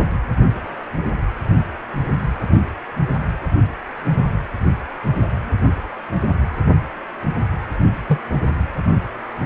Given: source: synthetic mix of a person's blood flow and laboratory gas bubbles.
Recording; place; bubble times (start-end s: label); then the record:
Doppler ultrasound of blood flow; precordium
8.07-8.18 s: bubbles
From the record:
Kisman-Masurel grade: 112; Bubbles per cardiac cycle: 1 to 2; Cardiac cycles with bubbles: 1 to 10%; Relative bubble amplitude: moderate (0.250 to 0.450); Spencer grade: 1 (occasional bubble signal discernible with the cardiac motion signal, with majority of cardiac periods free of bubbles); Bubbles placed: anywhere in the cardiac cycle